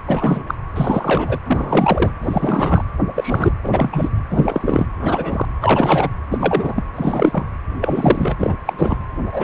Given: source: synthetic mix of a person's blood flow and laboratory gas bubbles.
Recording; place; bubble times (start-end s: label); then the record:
Doppler ultrasound of blood flow; precordium
0.07-0.43 s: bubbles
0.47-0.54 s: bubbles
0.75-1.39 s: bubbles
1.45-2.11 s: bubbles
2.21-2.84 s: bubbles
3.15-3.52 s: bubbles
3.63-4.09 s: bubbles
4.29-4.87 s: bubbles
5.00-5.46 s: bubbles
5.60-6.09 s: bubbles
6.30-6.84 s: bubbles
6.95-7.46 s: bubbles
7.81-8.54 s: bubbles
8.65-8.98 s: bubbles
9.32-9.44 s: bubbles
From the record:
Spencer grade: 3 (all of the cardiac periods contain showers or single bubble signals, but not dominating or overriding the cardiac motion signals); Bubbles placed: anywhere in the cardiac cycle